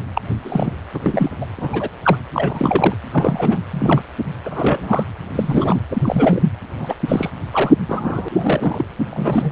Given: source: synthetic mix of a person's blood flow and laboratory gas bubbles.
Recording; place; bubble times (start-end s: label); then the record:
Doppler ultrasound of blood flow; precordium
0.15-0.22 s: bubbles
0.42-0.74 s: bubbles
0.94-0.99 s: bubbles
1.02-1.29 s: bubbles
1.41-1.46 s: bubbles
1.57-1.89 s: bubbles
2.03-2.17 s: bubbles
2.33-2.95 s: bubbles
3.13-3.60 s: bubbles
3.71-4.03 s: bubbles
4.45-5.04 s: bubbles
5.33-5.81 s: bubbles
5.89-6.43 s: bubbles
6.75-6.95 s: bubbles
7.08-7.30 s: bubbles
7.53-7.74 s: bubbles
7.87-8.84 s: bubbles
9.10-9.52 s: bubbles
From the record:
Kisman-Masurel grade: 242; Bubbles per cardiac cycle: several, 3 to 8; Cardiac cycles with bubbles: 100%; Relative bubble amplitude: moderate (0.250 to 0.450); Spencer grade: 3 (all of the cardiac periods contain showers or single bubble signals, but not dominating or overriding the cardiac motion signals); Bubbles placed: anywhere in the cardiac cycle